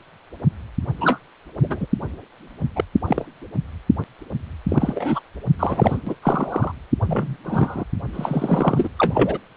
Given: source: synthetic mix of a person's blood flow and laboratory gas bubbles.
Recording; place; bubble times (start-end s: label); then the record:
Doppler ultrasound of blood flow; precordium
1.00-1.19 s: bubbles
1.61-1.87 s: bubbles
2.75-2.84 s: bubbles
3.07-3.25 s: bubbles
4.69-5.20 s: bubbles
5.59-5.98 s: bubbles
6.07-6.14 s: bubbles
6.22-6.72 s: bubbles
7.02-7.37 s: bubbles
7.44-7.84 s: bubbles
8.13-8.89 s: bubbles
8.99-9.38 s: bubbles
From the record:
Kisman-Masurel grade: 232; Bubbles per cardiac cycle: several, 3 to 8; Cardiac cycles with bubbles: 50 to 99%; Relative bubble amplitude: moderate (0.250 to 0.450); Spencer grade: 3 (all of the cardiac periods contain showers or single bubble signals, but not dominating or overriding the cardiac motion signals); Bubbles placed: anywhere in the cardiac cycle